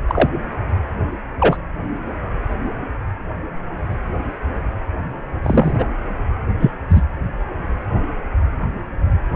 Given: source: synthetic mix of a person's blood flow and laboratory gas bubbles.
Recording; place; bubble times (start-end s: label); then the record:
Doppler ultrasound of blood flow; precordium
0.08-0.28 s: bubbles
1.40-1.57 s: bubbles
5.44-5.88 s: bubbles
6.59-6.71 s: bubbles
6.90-7.01 s: bubbles
From the record:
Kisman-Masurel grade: 123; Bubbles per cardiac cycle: 1 to 2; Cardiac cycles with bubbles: 10 to 50%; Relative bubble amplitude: loud (0.450 to 0.775); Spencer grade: 2 (many but less than half of the cardiac periods contain bubble signals, singularly or in groups); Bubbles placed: anywhere in the cardiac cycle